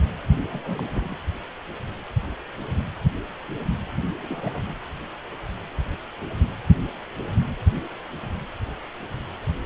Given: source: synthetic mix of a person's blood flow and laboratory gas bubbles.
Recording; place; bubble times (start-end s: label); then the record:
Doppler ultrasound of blood flow; precordium
0.50-1.17 s: bubbles
4.20-4.75 s: bubbles
From the record:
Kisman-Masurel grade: 221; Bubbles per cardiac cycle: several, 3 to 8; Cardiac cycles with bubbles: 10 to 50%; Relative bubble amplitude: barely perceptible (0.100 to 0.250); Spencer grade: 2 (many but less than half of the cardiac periods contain bubble signals, singularly or in groups); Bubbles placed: anywhere in the cardiac cycle